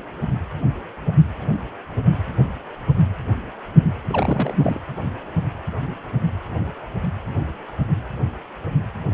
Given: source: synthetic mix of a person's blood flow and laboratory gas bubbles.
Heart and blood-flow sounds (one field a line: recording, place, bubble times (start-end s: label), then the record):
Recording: Doppler ultrasound of blood flow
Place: precordium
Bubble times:
4.09-4.79 s: bubbles
From the record:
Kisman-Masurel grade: 211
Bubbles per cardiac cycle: several, 3 to 8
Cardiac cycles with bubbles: 1 to 10%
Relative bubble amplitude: barely perceptible (0.100 to 0.250)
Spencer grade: 1 (occasional bubble signal discernible with the cardiac motion signal, with majority of cardiac periods free of bubbles)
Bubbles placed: anywhere in the cardiac cycle